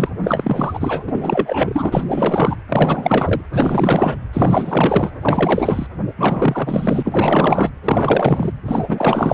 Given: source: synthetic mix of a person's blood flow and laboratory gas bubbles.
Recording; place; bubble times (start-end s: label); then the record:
Doppler ultrasound of blood flow; precordium
0.00-0.10 s: bubbles
0.22-1.03 s: bubbles
1.06-2.04 s: bubbles
2.07-2.57 s: bubbles
2.69-3.41 s: bubbles
3.53-4.16 s: bubbles
4.33-5.11 s: bubbles
5.21-5.87 s: bubbles
6.17-7.03 s: bubbles
7.05-7.70 s: bubbles
7.84-8.53 s: bubbles
8.66-9.34 s: bubbles
From the record:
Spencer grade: 4 (maximum detectable bubble signal sounding continuously throughout systole and diastole of every cardiac period, and overriding the amplitude of the normal cardiac signals); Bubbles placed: anywhere in the cardiac cycle